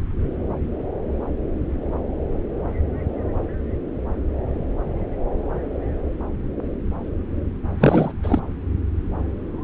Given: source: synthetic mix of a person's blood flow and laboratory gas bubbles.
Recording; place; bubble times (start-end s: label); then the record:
Doppler ultrasound of blood flow; subclavian vein
7.79-8.12 s: bubbles
8.22-8.40 s: bubbles
From the record:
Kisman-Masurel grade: 213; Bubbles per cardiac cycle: several, 3 to 8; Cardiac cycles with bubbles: 1 to 10%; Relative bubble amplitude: loud (0.450 to 0.775); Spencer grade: 1 (occasional bubble signal discernible with the cardiac motion signal, with majority of cardiac periods free of bubbles); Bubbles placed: anywhere in the cardiac cycle